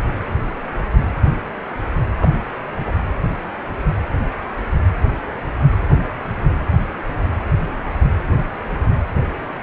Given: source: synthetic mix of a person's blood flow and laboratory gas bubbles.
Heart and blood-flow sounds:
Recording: Doppler ultrasound of blood flow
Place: precordium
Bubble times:
2.17-2.31 s: bubbles
2.86-2.93 s: bubbles
From the record:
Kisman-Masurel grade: 122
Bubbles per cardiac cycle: 1 to 2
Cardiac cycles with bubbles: 10 to 50%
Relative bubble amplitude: moderate (0.250 to 0.450)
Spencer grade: 2 (many but less than half of the cardiac periods contain bubble signals, singularly or in groups)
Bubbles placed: anywhere in the cardiac cycle

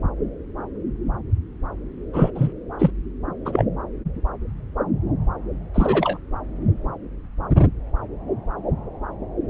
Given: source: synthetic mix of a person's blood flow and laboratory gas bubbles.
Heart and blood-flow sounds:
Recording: Doppler ultrasound of blood flow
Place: subclavian vein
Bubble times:
2.13-2.31 s: bubbles
2.35-2.53 s: bubbles
2.79-2.91 s: bubbles
3.45-3.65 s: bubbles
5.74-6.19 s: bubbles
From the record:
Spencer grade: 2 (many but less than half of the cardiac periods contain bubble signals, singularly or in groups)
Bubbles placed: anywhere in the cardiac cycle

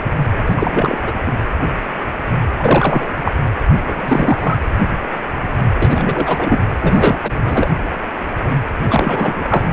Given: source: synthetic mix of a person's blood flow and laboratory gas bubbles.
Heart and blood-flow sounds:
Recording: Doppler ultrasound of blood flow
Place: precordium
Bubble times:
0.46-0.98 s: bubbles
1.06-1.11 s: bubbles
1.26-1.32 s: bubbles
2.60-3.10 s: bubbles
3.25-3.32 s: bubbles
3.71-3.79 s: bubbles
3.86-4.58 s: bubbles
5.74-6.66 s: bubbles
6.81-7.19 s: bubbles
7.23-7.32 s: bubbles
7.44-7.71 s: bubbles
8.88-9.64 s: bubbles
From the record:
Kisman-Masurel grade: 333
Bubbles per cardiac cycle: rolling drumbeat, 9 or more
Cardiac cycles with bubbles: 50 to 99%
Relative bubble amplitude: loud (0.450 to 0.775)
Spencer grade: 3 (all of the cardiac periods contain showers or single bubble signals, but not dominating or overriding the cardiac motion signals)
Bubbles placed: anywhere in the cardiac cycle

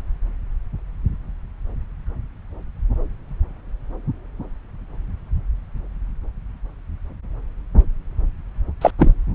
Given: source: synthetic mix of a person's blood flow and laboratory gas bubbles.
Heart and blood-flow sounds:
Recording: Doppler ultrasound of blood flow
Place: subclavian vein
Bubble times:
8.81-8.91 s: bubbles
8.99-9.12 s: bubbles
From the record:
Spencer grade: 1 (occasional bubble signal discernible with the cardiac motion signal, with majority of cardiac periods free of bubbles)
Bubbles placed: anywhere in the cardiac cycle

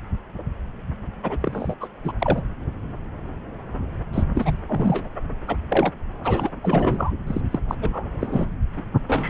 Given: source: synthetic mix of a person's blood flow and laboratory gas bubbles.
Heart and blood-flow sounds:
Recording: Doppler ultrasound of blood flow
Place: subclavian vein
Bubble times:
1.23-1.38 s: bubbles
1.41-1.74 s: bubbles
1.80-1.89 s: bubbles
2.04-2.12 s: bubbles
2.21-2.42 s: bubbles
4.12-4.23 s: bubbles
4.34-4.60 s: bubbles
4.68-5.08 s: bubbles
5.47-5.56 s: bubbles
5.70-5.92 s: bubbles
6.23-6.49 s: bubbles
6.62-7.12 s: bubbles
7.26-7.42 s: bubbles
7.50-7.59 s: bubbles
7.68-7.75 s: bubbles
7.82-8.09 s: bubbles
8.21-8.46 s: bubbles
8.77-8.82 s: bubbles
9.07-9.30 s: bubbles
From the record:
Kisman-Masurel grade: 332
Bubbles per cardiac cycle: rolling drumbeat, 9 or more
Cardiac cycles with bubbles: 50 to 99%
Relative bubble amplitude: moderate (0.250 to 0.450)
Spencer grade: 3 (all of the cardiac periods contain showers or single bubble signals, but not dominating or overriding the cardiac motion signals)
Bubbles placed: anywhere in the cardiac cycle

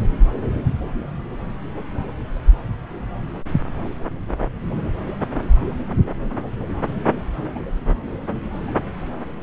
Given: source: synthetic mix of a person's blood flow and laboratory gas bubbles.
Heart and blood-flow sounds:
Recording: Doppler ultrasound of blood flow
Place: subclavian vein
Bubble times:
7.55-7.58 s: bubbles
From the record:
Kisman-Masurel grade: 121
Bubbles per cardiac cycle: 1 to 2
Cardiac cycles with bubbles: 10 to 50%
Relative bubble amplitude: barely perceptible (0.100 to 0.250)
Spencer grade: 2 (many but less than half of the cardiac periods contain bubble signals, singularly or in groups)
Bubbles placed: anywhere in the cardiac cycle

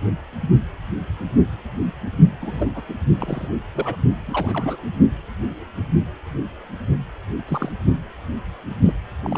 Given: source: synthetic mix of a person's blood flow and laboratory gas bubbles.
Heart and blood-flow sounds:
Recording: Doppler ultrasound of blood flow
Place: precordium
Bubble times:
2.40-2.82 s: bubbles
2.88-2.95 s: bubbles
3.19-3.48 s: bubbles
3.73-3.96 s: bubbles
4.16-4.78 s: bubbles
7.36-7.44 s: bubbles
7.48-7.72 s: bubbles
8.86-8.93 s: bubbles
9.23-9.38 s: bubbles
From the record:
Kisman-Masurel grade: 221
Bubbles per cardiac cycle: several, 3 to 8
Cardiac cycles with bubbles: 10 to 50%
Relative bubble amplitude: barely perceptible (0.100 to 0.250)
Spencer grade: 2 (many but less than half of the cardiac periods contain bubble signals, singularly or in groups)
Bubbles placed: only in the low amplitude regions of the cardiac cycle

